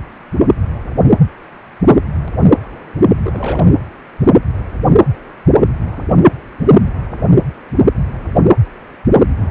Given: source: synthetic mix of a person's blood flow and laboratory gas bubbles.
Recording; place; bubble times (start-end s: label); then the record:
Doppler ultrasound of blood flow; precordium
3.23-3.75 s: bubbles
From the record:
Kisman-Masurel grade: 222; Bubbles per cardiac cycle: several, 3 to 8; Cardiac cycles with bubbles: 10 to 50%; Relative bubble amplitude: moderate (0.250 to 0.450); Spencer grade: 2 (many but less than half of the cardiac periods contain bubble signals, singularly or in groups); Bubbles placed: anywhere in the cardiac cycle